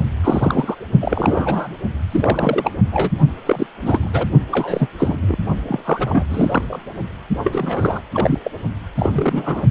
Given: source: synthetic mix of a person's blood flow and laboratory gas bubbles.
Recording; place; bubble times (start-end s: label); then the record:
Doppler ultrasound of blood flow; precordium
0.23-0.75 s: bubbles
1.01-1.75 s: bubbles
2.11-2.71 s: bubbles
2.79-3.10 s: bubbles
3.46-3.67 s: bubbles
3.81-4.10 s: bubbles
4.13-4.25 s: bubbles
4.51-4.88 s: bubbles
4.98-5.18 s: bubbles
5.21-5.36 s: bubbles
5.68-6.24 s: bubbles
6.30-6.79 s: bubbles
7.44-8.01 s: bubbles
8.13-8.38 s: bubbles
8.45-8.51 s: bubbles
8.95-9.65 s: bubbles
From the record:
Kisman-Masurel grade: 342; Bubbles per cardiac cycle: rolling drumbeat, 9 or more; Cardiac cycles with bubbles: 100%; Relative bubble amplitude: moderate (0.250 to 0.450); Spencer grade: 3 (all of the cardiac periods contain showers or single bubble signals, but not dominating or overriding the cardiac motion signals); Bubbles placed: only in the low amplitude regions of the cardiac cycle